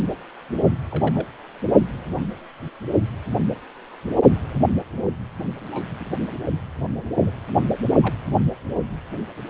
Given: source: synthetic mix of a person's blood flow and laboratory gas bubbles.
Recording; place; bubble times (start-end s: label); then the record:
Doppler ultrasound of blood flow; precordium
0.91-1.26 s: bubbles
2.11-2.21 s: bubbles
5.71-5.88 s: bubbles
6.00-6.04 s: bubbles
7.26-7.30 s: bubbles
8.02-8.15 s: bubbles
From the record:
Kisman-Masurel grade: 121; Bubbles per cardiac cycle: 1 to 2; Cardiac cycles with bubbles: 10 to 50%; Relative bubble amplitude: barely perceptible (0.100 to 0.250); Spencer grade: 2 (many but less than half of the cardiac periods contain bubble signals, singularly or in groups); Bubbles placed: only in the low amplitude regions of the cardiac cycle